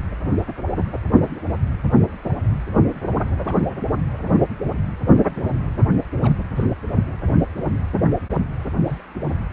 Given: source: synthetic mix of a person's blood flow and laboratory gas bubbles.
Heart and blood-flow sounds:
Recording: Doppler ultrasound of blood flow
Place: precordium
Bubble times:
3.44-3.60 s: bubbles
6.22-6.33 s: bubbles
6.56-6.64 s: bubbles
7.26-7.48 s: bubbles
8.85-9.01 s: bubbles
From the record:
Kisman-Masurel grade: 121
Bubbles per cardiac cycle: 1 to 2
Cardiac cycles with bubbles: 10 to 50%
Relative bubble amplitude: barely perceptible (0.100 to 0.250)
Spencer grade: 2 (many but less than half of the cardiac periods contain bubble signals, singularly or in groups)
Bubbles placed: anywhere in the cardiac cycle

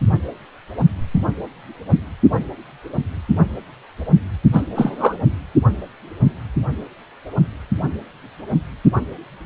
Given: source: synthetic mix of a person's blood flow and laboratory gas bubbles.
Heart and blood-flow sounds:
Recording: Doppler ultrasound of blood flow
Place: precordium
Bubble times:
4.53-4.62 s: bubbles
4.75-5.20 s: bubbles
From the record:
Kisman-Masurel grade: 213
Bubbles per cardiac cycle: several, 3 to 8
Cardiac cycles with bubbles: 1 to 10%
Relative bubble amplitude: loud (0.450 to 0.775)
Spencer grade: 1 (occasional bubble signal discernible with the cardiac motion signal, with majority of cardiac periods free of bubbles)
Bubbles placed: anywhere in the cardiac cycle

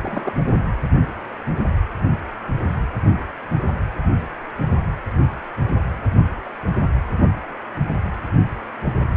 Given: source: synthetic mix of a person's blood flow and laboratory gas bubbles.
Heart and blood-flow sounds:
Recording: Doppler ultrasound of blood flow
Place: precordium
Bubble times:
0.01-0.33 s: bubbles
From the record:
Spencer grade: 1 (occasional bubble signal discernible with the cardiac motion signal, with majority of cardiac periods free of bubbles)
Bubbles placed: anywhere in the cardiac cycle

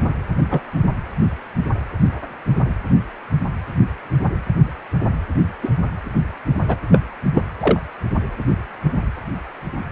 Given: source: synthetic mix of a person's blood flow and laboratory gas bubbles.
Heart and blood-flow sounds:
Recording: Doppler ultrasound of blood flow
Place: precordium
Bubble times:
0.50-0.61 s: bubbles
5.62-5.71 s: bubbles
6.68-6.77 s: bubbles
6.91-7.00 s: bubbles
7.34-7.42 s: bubbles
7.60-7.79 s: bubbles
From the record:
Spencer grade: 2 (many but less than half of the cardiac periods contain bubble signals, singularly or in groups)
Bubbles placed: anywhere in the cardiac cycle

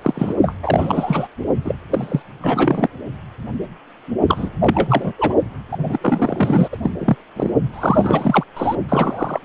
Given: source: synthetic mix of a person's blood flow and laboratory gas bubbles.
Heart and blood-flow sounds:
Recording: Doppler ultrasound of blood flow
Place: precordium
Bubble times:
0.01-0.35 s: bubbles
0.42-0.54 s: bubbles
0.62-1.27 s: bubbles
1.64-1.75 s: bubbles
1.90-2.22 s: bubbles
2.41-2.88 s: bubbles
4.26-4.50 s: bubbles
4.60-5.12 s: bubbles
5.18-5.34 s: bubbles
5.71-6.68 s: bubbles
6.72-6.77 s: bubbles
6.83-6.91 s: bubbles
6.99-7.16 s: bubbles
7.36-7.50 s: bubbles
7.73-8.44 s: bubbles
8.57-8.76 s: bubbles
8.89-9.45 s: bubbles
From the record:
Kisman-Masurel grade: 333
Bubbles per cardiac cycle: rolling drumbeat, 9 or more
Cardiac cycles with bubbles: 50 to 99%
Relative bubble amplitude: loud (0.450 to 0.775)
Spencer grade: 3 (all of the cardiac periods contain showers or single bubble signals, but not dominating or overriding the cardiac motion signals)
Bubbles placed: only in the low amplitude regions of the cardiac cycle

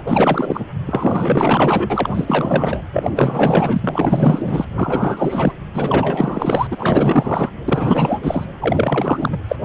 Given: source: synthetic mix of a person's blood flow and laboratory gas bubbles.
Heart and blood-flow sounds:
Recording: Doppler ultrasound of blood flow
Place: precordium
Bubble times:
0.07-0.66 s: bubbles
0.85-2.82 s: bubbles
2.92-4.66 s: bubbles
4.75-5.53 s: bubbles
5.74-6.67 s: bubbles
6.71-7.49 s: bubbles
7.67-8.20 s: bubbles
8.22-8.45 s: bubbles
8.60-9.38 s: bubbles
9.48-9.56 s: bubbles
From the record:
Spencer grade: 4 (maximum detectable bubble signal sounding continuously throughout systole and diastole of every cardiac period, and overriding the amplitude of the normal cardiac signals)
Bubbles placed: anywhere in the cardiac cycle

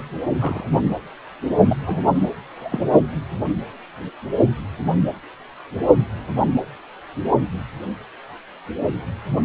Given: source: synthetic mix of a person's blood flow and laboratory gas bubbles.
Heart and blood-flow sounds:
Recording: Doppler ultrasound of blood flow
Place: precordium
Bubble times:
0.39-0.70 s: bubbles
1.68-1.77 s: bubbles
1.86-2.06 s: bubbles
2.56-2.85 s: bubbles
From the record:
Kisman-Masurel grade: 121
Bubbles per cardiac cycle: 1 to 2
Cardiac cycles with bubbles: 10 to 50%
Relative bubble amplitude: barely perceptible (0.100 to 0.250)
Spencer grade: 2 (many but less than half of the cardiac periods contain bubble signals, singularly or in groups)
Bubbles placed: anywhere in the cardiac cycle

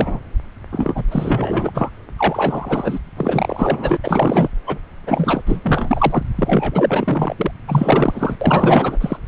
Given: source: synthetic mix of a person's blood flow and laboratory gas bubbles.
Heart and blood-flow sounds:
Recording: Doppler ultrasound of blood flow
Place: subclavian vein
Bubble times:
0.00-0.20 s: bubbles
0.72-1.03 s: bubbles
1.11-1.90 s: bubbles
2.18-2.99 s: bubbles
3.17-3.97 s: bubbles
4.04-4.49 s: bubbles
4.67-4.78 s: bubbles
5.07-5.42 s: bubbles
5.46-5.60 s: bubbles
5.63-6.23 s: bubbles
6.35-7.34 s: bubbles
7.38-7.51 s: bubbles
7.68-8.36 s: bubbles
8.41-8.98 s: bubbles
9.01-9.17 s: bubbles
From the record:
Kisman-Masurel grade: 444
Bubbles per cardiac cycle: continuous sound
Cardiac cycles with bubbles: 100%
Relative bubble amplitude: maximal (0.775 to 0.999)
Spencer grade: 4 (maximum detectable bubble signal sounding continuously throughout systole and diastole of every cardiac period, and overriding the amplitude of the normal cardiac signals)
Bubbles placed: anywhere in the cardiac cycle

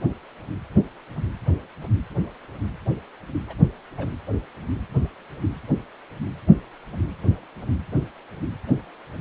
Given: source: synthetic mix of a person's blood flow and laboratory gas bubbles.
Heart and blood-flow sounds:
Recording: Doppler ultrasound of blood flow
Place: precordium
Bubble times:
3.47-3.53 s: bubbles
3.97-4.08 s: bubbles
From the record:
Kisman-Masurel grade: 111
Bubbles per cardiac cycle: 1 to 2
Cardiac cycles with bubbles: 1 to 10%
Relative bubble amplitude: barely perceptible (0.100 to 0.250)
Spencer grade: 1 (occasional bubble signal discernible with the cardiac motion signal, with majority of cardiac periods free of bubbles)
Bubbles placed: anywhere in the cardiac cycle

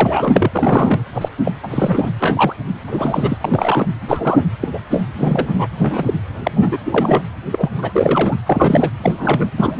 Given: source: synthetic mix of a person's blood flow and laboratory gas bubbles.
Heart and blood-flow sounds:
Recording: Doppler ultrasound of blood flow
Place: precordium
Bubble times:
0.00-0.51 s: bubbles
0.54-1.04 s: bubbles
1.14-1.29 s: bubbles
1.45-1.52 s: bubbles
1.63-1.68 s: bubbles
1.70-2.10 s: bubbles
2.19-2.54 s: bubbles
2.87-3.38 s: bubbles
3.41-3.88 s: bubbles
4.07-4.44 s: bubbles
4.62-4.69 s: bubbles
4.72-4.80 s: bubbles
4.90-5.03 s: bubbles
5.17-5.67 s: bubbles
5.78-6.14 s: bubbles
6.43-6.77 s: bubbles
6.84-7.22 s: bubbles
7.52-7.69 s: bubbles
7.76-8.37 s: bubbles
8.46-8.90 s: bubbles
9.03-9.50 s: bubbles
9.57-9.80 s: bubbles
From the record:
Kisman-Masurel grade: 243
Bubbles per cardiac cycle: several, 3 to 8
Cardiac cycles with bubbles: 100%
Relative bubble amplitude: loud (0.450 to 0.775)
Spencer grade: 3 (all of the cardiac periods contain showers or single bubble signals, but not dominating or overriding the cardiac motion signals)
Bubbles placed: anywhere in the cardiac cycle

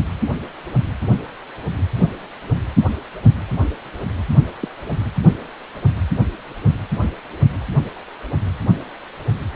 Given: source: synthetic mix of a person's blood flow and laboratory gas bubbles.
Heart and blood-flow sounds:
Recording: Doppler ultrasound of blood flow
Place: precordium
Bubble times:
4.61-4.68 s: bubbles
From the record:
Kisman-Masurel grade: 112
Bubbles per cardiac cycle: 1 to 2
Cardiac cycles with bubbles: 1 to 10%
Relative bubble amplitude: moderate (0.250 to 0.450)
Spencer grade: 1 (occasional bubble signal discernible with the cardiac motion signal, with majority of cardiac periods free of bubbles)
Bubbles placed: only in the low amplitude regions of the cardiac cycle

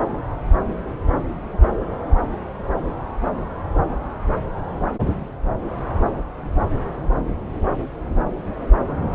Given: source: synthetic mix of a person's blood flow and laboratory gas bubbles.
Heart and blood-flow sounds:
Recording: Doppler ultrasound of blood flow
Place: subclavian vein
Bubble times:
no bubbles
From the record:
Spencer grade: 0 (complete lack of bubble signals)

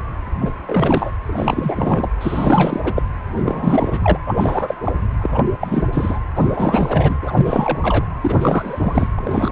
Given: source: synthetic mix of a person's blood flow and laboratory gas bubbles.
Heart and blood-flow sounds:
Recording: Doppler ultrasound of blood flow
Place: precordium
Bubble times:
0.41-0.51 s: bubbles
0.66-1.14 s: bubbles
1.25-2.11 s: bubbles
2.21-2.93 s: bubbles
2.96-3.02 s: bubbles
3.36-3.99 s: bubbles
4.03-4.19 s: bubbles
4.27-4.75 s: bubbles
4.83-4.93 s: bubbles
5.21-5.45 s: bubbles
5.60-5.88 s: bubbles
5.93-6.20 s: bubbles
6.36-7.19 s: bubbles
7.22-8.05 s: bubbles
8.21-9.08 s: bubbles
9.15-9.52 s: bubbles
From the record:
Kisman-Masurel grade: 343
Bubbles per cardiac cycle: rolling drumbeat, 9 or more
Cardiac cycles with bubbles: 100%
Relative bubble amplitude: loud (0.450 to 0.775)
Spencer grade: 3 (all of the cardiac periods contain showers or single bubble signals, but not dominating or overriding the cardiac motion signals)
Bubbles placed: anywhere in the cardiac cycle

